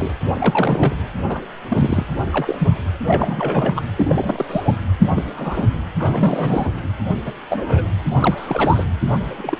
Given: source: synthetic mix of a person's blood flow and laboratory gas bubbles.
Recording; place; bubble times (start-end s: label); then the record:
Doppler ultrasound of blood flow; precordium
0.00-0.15 s: bubbles
0.33-0.96 s: bubbles
1.25-1.42 s: bubbles
1.68-2.06 s: bubbles
2.33-2.68 s: bubbles
3.06-3.82 s: bubbles
3.97-4.45 s: bubbles
4.49-4.73 s: bubbles
5.00-5.08 s: bubbles
5.16-5.24 s: bubbles
5.38-5.67 s: bubbles
6.00-6.70 s: bubbles
7.25-7.33 s: bubbles
7.49-7.83 s: bubbles
8.14-8.85 s: bubbles
9.12-9.18 s: bubbles
9.38-9.56 s: bubbles
From the record:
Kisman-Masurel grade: 242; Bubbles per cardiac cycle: several, 3 to 8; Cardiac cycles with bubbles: 100%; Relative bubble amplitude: moderate (0.250 to 0.450); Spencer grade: 3 (all of the cardiac periods contain showers or single bubble signals, but not dominating or overriding the cardiac motion signals); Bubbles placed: anywhere in the cardiac cycle